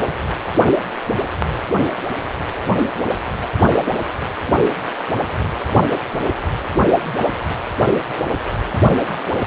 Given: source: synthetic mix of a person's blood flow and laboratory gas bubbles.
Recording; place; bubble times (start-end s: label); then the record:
Doppler ultrasound of blood flow; precordium
no bubbles
From the record:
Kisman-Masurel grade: 000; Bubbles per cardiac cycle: 0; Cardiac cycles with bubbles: 0%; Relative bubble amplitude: no bubbles discernible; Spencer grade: 0 (complete lack of bubble signals)